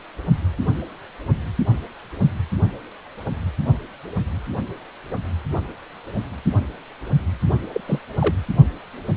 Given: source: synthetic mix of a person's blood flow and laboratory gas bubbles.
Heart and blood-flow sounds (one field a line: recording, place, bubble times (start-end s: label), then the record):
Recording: Doppler ultrasound of blood flow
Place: precordium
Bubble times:
7.73-7.81 s: bubbles
7.86-7.99 s: bubbles
8.21-8.35 s: bubbles
From the record:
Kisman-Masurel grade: 212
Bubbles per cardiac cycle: several, 3 to 8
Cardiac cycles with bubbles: 1 to 10%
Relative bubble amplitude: moderate (0.250 to 0.450)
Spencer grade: 1 (occasional bubble signal discernible with the cardiac motion signal, with majority of cardiac periods free of bubbles)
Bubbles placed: only in the low amplitude regions of the cardiac cycle